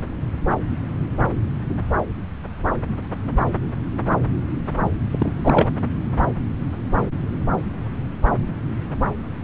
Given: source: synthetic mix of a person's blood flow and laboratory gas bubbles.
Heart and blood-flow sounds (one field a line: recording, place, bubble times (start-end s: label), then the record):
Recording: Doppler ultrasound of blood flow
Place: subclavian vein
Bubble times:
5.10-5.68 s: bubbles
From the record:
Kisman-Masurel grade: 212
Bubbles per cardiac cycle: several, 3 to 8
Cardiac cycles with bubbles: 1 to 10%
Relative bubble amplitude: moderate (0.250 to 0.450)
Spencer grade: 1 (occasional bubble signal discernible with the cardiac motion signal, with majority of cardiac periods free of bubbles)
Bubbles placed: anywhere in the cardiac cycle